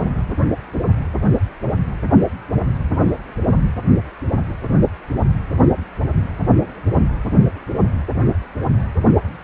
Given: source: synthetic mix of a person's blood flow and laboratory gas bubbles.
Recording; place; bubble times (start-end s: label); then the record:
Doppler ultrasound of blood flow; precordium
no bubbles
From the record:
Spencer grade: 0 (complete lack of bubble signals)